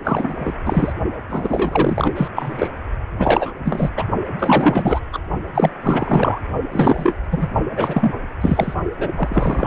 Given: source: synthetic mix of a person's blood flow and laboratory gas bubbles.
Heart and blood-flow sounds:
Doppler ultrasound of blood flow; precordium
0.04-0.34 s: bubbles
0.39-0.55 s: bubbles
0.65-0.93 s: bubbles
1.29-2.12 s: bubbles
2.15-2.29 s: bubbles
2.35-2.68 s: bubbles
3.15-3.55 s: bubbles
3.64-3.90 s: bubbles
3.97-4.04 s: bubbles
4.39-5.00 s: bubbles
5.12-5.19 s: bubbles
5.54-5.70 s: bubbles
5.82-6.39 s: bubbles
6.71-7.13 s: bubbles
7.31-7.48 s: bubbles
7.76-8.14 s: bubbles
8.40-8.74 s: bubbles
8.97-9.12 s: bubbles
9.15-9.67 s: bubbles
From the record:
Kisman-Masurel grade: 343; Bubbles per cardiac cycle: rolling drumbeat, 9 or more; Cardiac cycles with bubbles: 100%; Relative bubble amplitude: loud (0.450 to 0.775); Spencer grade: 3 (all of the cardiac periods contain showers or single bubble signals, but not dominating or overriding the cardiac motion signals); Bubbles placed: only in the low amplitude regions of the cardiac cycle

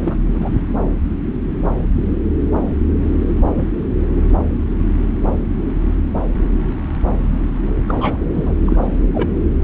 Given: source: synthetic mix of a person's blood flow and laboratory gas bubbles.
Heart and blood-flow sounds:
Doppler ultrasound of blood flow; subclavian vein
0.01-0.17 s: bubbles
0.34-0.50 s: bubbles
3.53-3.63 s: bubbles
7.88-8.24 s: bubbles
8.32-8.56 s: bubbles
8.65-8.77 s: bubbles
9.14-9.29 s: bubbles
From the record:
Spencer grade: 2 (many but less than half of the cardiac periods contain bubble signals, singularly or in groups); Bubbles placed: anywhere in the cardiac cycle

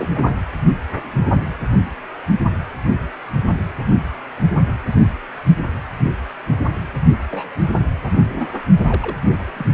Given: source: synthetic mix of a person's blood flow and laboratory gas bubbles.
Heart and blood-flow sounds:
Doppler ultrasound of blood flow; precordium
0.00-0.08 s: bubbles
0.14-0.34 s: bubbles
7.31-7.51 s: bubbles
8.04-8.10 s: bubbles
8.29-8.48 s: bubbles
8.87-9.18 s: bubbles
9.54-9.66 s: bubbles
From the record:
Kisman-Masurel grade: 221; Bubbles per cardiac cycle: several, 3 to 8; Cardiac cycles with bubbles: 10 to 50%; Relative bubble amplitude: barely perceptible (0.100 to 0.250); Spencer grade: 2 (many but less than half of the cardiac periods contain bubble signals, singularly or in groups); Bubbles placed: only in the low amplitude regions of the cardiac cycle

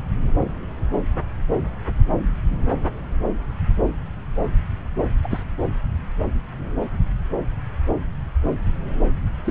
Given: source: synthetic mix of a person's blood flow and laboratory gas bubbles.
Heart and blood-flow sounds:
Doppler ultrasound of blood flow; subclavian vein
5.23-5.44 s: bubbles
9.45-9.51 s: bubbles
From the record:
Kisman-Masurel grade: 121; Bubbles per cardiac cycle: 1 to 2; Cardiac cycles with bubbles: 10 to 50%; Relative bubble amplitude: barely perceptible (0.100 to 0.250); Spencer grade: 2 (many but less than half of the cardiac periods contain bubble signals, singularly or in groups); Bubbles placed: anywhere in the cardiac cycle

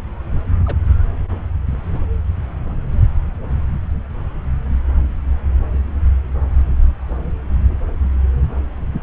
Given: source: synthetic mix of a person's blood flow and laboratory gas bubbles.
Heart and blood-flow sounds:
Doppler ultrasound of blood flow; subclavian vein
0.66-0.77 s: bubbles
From the record:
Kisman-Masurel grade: 111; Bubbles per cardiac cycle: 1 to 2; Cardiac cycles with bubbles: 1 to 10%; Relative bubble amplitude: barely perceptible (0.100 to 0.250); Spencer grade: 1 (occasional bubble signal discernible with the cardiac motion signal, with majority of cardiac periods free of bubbles); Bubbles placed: anywhere in the cardiac cycle

